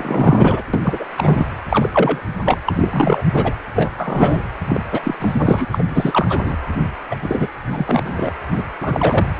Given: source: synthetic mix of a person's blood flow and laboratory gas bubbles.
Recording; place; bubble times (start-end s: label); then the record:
Doppler ultrasound of blood flow; precordium
0.00-0.62 s: bubbles
0.73-1.05 s: bubbles
1.17-1.46 s: bubbles
1.70-2.21 s: bubbles
2.44-2.60 s: bubbles
2.66-2.73 s: bubbles
2.76-3.22 s: bubbles
3.34-3.52 s: bubbles
3.75-3.91 s: bubbles
3.97-4.42 s: bubbles
4.67-4.80 s: bubbles
4.92-5.00 s: bubbles
5.03-5.14 s: bubbles
5.20-5.65 s: bubbles
5.71-5.83 s: bubbles
5.89-6.56 s: bubbles
7.09-7.16 s: bubbles
7.22-7.48 s: bubbles
7.70-8.31 s: bubbles
8.52-8.63 s: bubbles
8.81-9.26 s: bubbles
9.36-9.40 s: bubbles
From the record:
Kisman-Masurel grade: 343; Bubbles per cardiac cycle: rolling drumbeat, 9 or more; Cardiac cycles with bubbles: 100%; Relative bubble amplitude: loud (0.450 to 0.775); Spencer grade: 3 (all of the cardiac periods contain showers or single bubble signals, but not dominating or overriding the cardiac motion signals); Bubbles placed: anywhere in the cardiac cycle